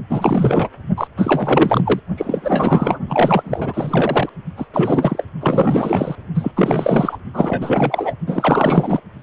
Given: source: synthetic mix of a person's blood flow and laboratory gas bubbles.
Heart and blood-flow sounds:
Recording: Doppler ultrasound of blood flow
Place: precordium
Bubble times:
0.09-0.69 s: bubbles
0.97-1.07 s: bubbles
1.17-2.00 s: bubbles
2.17-3.00 s: bubbles
3.08-4.29 s: bubbles
4.57-4.67 s: bubbles
4.73-5.24 s: bubbles
5.41-6.16 s: bubbles
6.35-6.52 s: bubbles
6.56-7.17 s: bubbles
7.33-8.14 s: bubbles
8.27-9.01 s: bubbles
From the record:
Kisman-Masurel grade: 444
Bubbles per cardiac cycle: continuous sound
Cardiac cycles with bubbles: 100%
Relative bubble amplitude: maximal (0.775 to 0.999)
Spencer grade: 4 (maximum detectable bubble signal sounding continuously throughout systole and diastole of every cardiac period, and overriding the amplitude of the normal cardiac signals)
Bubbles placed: only in the low amplitude regions of the cardiac cycle

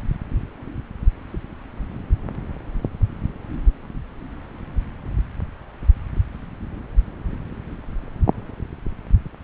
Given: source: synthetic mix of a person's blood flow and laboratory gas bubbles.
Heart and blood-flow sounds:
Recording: Doppler ultrasound of blood flow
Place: subclavian vein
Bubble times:
no bubbles
From the record:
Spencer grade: 0 (complete lack of bubble signals)

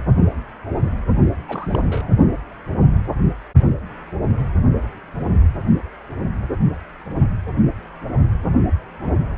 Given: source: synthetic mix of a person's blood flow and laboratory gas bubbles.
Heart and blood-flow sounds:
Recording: Doppler ultrasound of blood flow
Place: precordium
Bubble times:
1.48-2.10 s: bubbles
From the record:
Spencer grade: 1 (occasional bubble signal discernible with the cardiac motion signal, with majority of cardiac periods free of bubbles)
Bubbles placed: only in the low amplitude regions of the cardiac cycle

